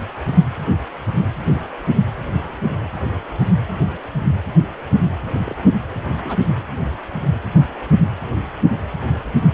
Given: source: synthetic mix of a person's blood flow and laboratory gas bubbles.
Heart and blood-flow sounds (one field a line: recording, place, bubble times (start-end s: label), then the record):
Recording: Doppler ultrasound of blood flow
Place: precordium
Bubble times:
1.50-1.61 s: bubbles
5.32-5.54 s: bubbles
6.21-6.39 s: bubbles
9.39-9.53 s: bubbles
From the record:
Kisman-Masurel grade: 121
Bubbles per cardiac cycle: 1 to 2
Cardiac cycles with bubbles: 10 to 50%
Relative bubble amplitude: barely perceptible (0.100 to 0.250)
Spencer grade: 2 (many but less than half of the cardiac periods contain bubble signals, singularly or in groups)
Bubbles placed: anywhere in the cardiac cycle